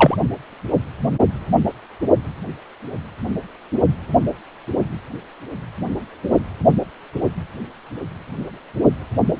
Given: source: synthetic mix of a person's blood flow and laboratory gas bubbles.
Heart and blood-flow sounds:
Doppler ultrasound of blood flow; precordium
0.00-0.18 s: bubbles
From the record:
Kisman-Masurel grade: 113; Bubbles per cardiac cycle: 1 to 2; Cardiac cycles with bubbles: 1 to 10%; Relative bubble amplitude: loud (0.450 to 0.775); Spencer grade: 1 (occasional bubble signal discernible with the cardiac motion signal, with majority of cardiac periods free of bubbles); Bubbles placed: only in the low amplitude regions of the cardiac cycle

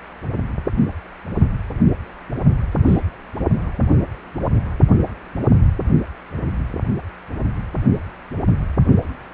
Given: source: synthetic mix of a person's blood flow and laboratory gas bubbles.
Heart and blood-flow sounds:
Doppler ultrasound of blood flow; precordium
2.85-3.00 s: bubbles
From the record:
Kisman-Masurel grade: 122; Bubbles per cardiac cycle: 1 to 2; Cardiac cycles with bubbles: 10 to 50%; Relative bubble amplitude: moderate (0.250 to 0.450); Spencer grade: 2 (many but less than half of the cardiac periods contain bubble signals, singularly or in groups); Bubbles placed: only in the low amplitude regions of the cardiac cycle

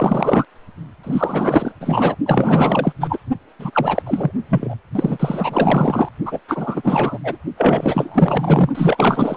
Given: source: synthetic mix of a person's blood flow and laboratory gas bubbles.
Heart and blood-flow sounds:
Doppler ultrasound of blood flow; precordium
0.00-0.45 s: bubbles
1.03-1.72 s: bubbles
1.80-2.16 s: bubbles
2.25-2.93 s: bubbles
3.00-3.20 s: bubbles
3.59-4.02 s: bubbles
4.06-4.31 s: bubbles
4.48-4.75 s: bubbles
4.95-6.09 s: bubbles
6.25-6.39 s: bubbles
6.48-7.18 s: bubbles
7.23-7.37 s: bubbles
7.57-8.70 s: bubbles
8.74-9.37 s: bubbles
From the record:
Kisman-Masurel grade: 444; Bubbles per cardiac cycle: continuous sound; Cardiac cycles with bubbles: 100%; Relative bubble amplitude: maximal (0.775 to 0.999); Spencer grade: 4 (maximum detectable bubble signal sounding continuously throughout systole and diastole of every cardiac period, and overriding the amplitude of the normal cardiac signals); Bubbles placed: only in the low amplitude regions of the cardiac cycle

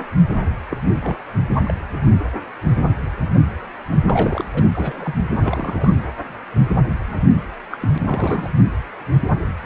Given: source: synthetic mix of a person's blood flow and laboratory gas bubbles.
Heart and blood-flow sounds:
Doppler ultrasound of blood flow; precordium
0.70-0.79 s: bubbles
1.02-1.16 s: bubbles
1.62-1.74 s: bubbles
4.04-4.44 s: bubbles
4.54-4.62 s: bubbles
4.73-5.15 s: bubbles
5.37-6.04 s: bubbles
7.09-7.17 s: bubbles
7.33-7.42 s: bubbles
7.71-7.77 s: bubbles
7.81-7.98 s: bubbles
8.03-8.50 s: bubbles
From the record:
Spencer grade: 2 (many but less than half of the cardiac periods contain bubble signals, singularly or in groups); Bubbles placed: anywhere in the cardiac cycle

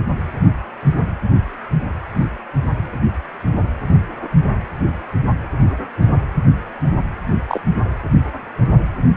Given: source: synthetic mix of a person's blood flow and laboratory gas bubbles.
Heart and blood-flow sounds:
Doppler ultrasound of blood flow; precordium
7.48-7.60 s: bubbles
From the record:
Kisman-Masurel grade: 112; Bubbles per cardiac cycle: 1 to 2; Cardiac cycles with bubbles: 1 to 10%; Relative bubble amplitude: moderate (0.250 to 0.450); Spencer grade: 1 (occasional bubble signal discernible with the cardiac motion signal, with majority of cardiac periods free of bubbles); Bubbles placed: anywhere in the cardiac cycle

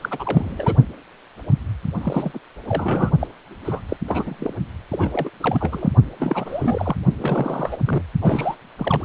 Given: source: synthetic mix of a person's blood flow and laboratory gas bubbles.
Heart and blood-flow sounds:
Doppler ultrasound of blood flow; precordium
0.00-0.77 s: bubbles
1.99-2.39 s: bubbles
2.67-3.12 s: bubbles
3.19-3.27 s: bubbles
3.65-3.80 s: bubbles
3.88-3.96 s: bubbles
4.08-4.54 s: bubbles
4.91-5.29 s: bubbles
5.40-5.90 s: bubbles
6.19-6.96 s: bubbles
7.17-7.77 s: bubbles
7.85-8.02 s: bubbles
8.21-8.56 s: bubbles
8.79-9.05 s: bubbles
From the record:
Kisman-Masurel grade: 332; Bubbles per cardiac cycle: rolling drumbeat, 9 or more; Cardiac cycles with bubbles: 50 to 99%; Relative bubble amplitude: moderate (0.250 to 0.450); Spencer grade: 3 (all of the cardiac periods contain showers or single bubble signals, but not dominating or overriding the cardiac motion signals); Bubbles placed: only in the low amplitude regions of the cardiac cycle

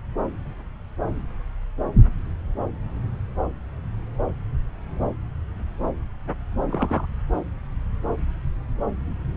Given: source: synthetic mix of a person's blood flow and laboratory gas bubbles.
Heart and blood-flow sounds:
Doppler ultrasound of blood flow; subclavian vein
6.67-7.06 s: bubbles
From the record:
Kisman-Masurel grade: 112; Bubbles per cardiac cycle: 1 to 2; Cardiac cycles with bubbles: 1 to 10%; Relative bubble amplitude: moderate (0.250 to 0.450); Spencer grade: 1 (occasional bubble signal discernible with the cardiac motion signal, with majority of cardiac periods free of bubbles); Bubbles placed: anywhere in the cardiac cycle

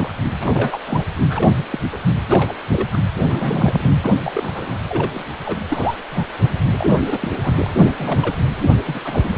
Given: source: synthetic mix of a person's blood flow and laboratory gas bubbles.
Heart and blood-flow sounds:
Doppler ultrasound of blood flow; precordium
0.00-0.13 s: bubbles
0.38-0.78 s: bubbles
0.84-1.06 s: bubbles
1.30-1.50 s: bubbles
1.71-1.80 s: bubbles
1.92-1.98 s: bubbles
2.28-2.52 s: bubbles
2.72-2.88 s: bubbles
2.92-2.97 s: bubbles
3.17-3.93 s: bubbles
4.00-4.17 s: bubbles
4.24-4.80 s: bubbles
4.88-5.09 s: bubbles
5.13-5.24 s: bubbles
5.46-5.58 s: bubbles
5.68-5.96 s: bubbles
6.10-6.25 s: bubbles
6.77-6.87 s: bubbles
7.06-7.35 s: bubbles
7.43-7.54 s: bubbles
7.58-7.70 s: bubbles
7.87-7.94 s: bubbles
7.98-8.36 s: bubbles
8.87-9.00 s: bubbles
9.04-9.38 s: bubbles
From the record:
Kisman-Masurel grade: 242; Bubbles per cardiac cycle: several, 3 to 8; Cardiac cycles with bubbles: 100%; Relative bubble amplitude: moderate (0.250 to 0.450); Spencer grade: 3 (all of the cardiac periods contain showers or single bubble signals, but not dominating or overriding the cardiac motion signals); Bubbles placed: anywhere in the cardiac cycle

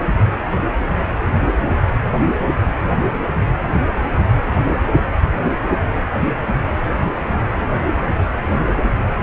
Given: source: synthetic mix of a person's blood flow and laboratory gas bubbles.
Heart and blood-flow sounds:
Doppler ultrasound of blood flow; precordium
1.20-1.36 s: bubbles
From the record:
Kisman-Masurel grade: 111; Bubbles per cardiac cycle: 1 to 2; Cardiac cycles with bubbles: 1 to 10%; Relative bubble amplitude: barely perceptible (0.100 to 0.250); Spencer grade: 1 (occasional bubble signal discernible with the cardiac motion signal, with majority of cardiac periods free of bubbles); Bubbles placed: anywhere in the cardiac cycle

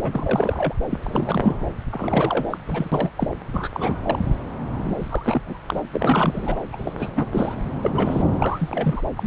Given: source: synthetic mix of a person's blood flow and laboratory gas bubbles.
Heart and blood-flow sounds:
Doppler ultrasound of blood flow; subclavian vein
0.03-0.74 s: bubbles
0.90-0.98 s: bubbles
1.03-1.56 s: bubbles
1.90-2.46 s: bubbles
2.50-2.57 s: bubbles
2.65-3.10 s: bubbles
3.17-3.28 s: bubbles
3.53-3.69 s: bubbles
3.73-4.19 s: bubbles
4.79-5.42 s: bubbles
5.46-5.57 s: bubbles
5.67-5.82 s: bubbles
5.92-6.58 s: bubbles
6.73-7.11 s: bubbles
7.16-7.27 s: bubbles
7.32-7.55 s: bubbles
7.61-7.70 s: bubbles
7.81-8.22 s: bubbles
8.32-9.03 s: bubbles
9.17-9.27 s: bubbles
From the record:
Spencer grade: 3 (all of the cardiac periods contain showers or single bubble signals, but not dominating or overriding the cardiac motion signals); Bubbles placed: anywhere in the cardiac cycle

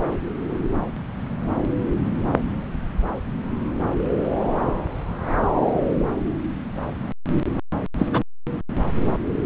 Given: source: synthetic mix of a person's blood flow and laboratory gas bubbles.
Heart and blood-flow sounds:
Doppler ultrasound of blood flow; subclavian vein
7.98-8.07 s: bubbles
8.12-8.23 s: bubbles
From the record:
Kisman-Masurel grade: 112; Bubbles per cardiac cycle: 1 to 2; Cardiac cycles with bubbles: 1 to 10%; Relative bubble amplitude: moderate (0.250 to 0.450); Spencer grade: 1 (occasional bubble signal discernible with the cardiac motion signal, with majority of cardiac periods free of bubbles); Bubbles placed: anywhere in the cardiac cycle

